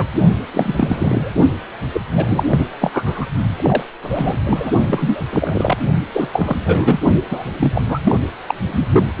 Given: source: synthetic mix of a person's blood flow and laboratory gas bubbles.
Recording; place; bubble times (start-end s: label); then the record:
Doppler ultrasound of blood flow; precordium
0.00-0.06 s: bubbles
0.53-1.33 s: bubbles
1.92-2.01 s: bubbles
2.15-2.45 s: bubbles
2.50-2.67 s: bubbles
2.80-3.26 s: bubbles
3.57-3.83 s: bubbles
4.03-4.37 s: bubbles
4.45-4.71 s: bubbles
4.87-5.22 s: bubbles
5.32-5.78 s: bubbles
6.14-6.57 s: bubbles
6.64-7.00 s: bubbles
7.31-7.44 s: bubbles
7.59-7.82 s: bubbles
7.89-7.99 s: bubbles
8.04-8.16 s: bubbles
8.46-8.54 s: bubbles
8.67-9.12 s: bubbles
From the record:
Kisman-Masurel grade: 343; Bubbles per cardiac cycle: rolling drumbeat, 9 or more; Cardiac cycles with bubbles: 100%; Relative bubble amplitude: loud (0.450 to 0.775); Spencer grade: 3 (all of the cardiac periods contain showers or single bubble signals, but not dominating or overriding the cardiac motion signals); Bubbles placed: only in the low amplitude regions of the cardiac cycle